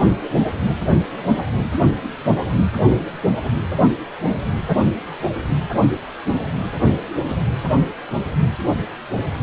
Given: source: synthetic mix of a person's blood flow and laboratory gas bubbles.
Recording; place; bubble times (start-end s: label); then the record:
Doppler ultrasound of blood flow; precordium
no bubbles
From the record:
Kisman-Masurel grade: 000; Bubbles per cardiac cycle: 0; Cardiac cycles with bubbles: 0%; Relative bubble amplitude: no bubbles discernible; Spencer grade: 0 (complete lack of bubble signals)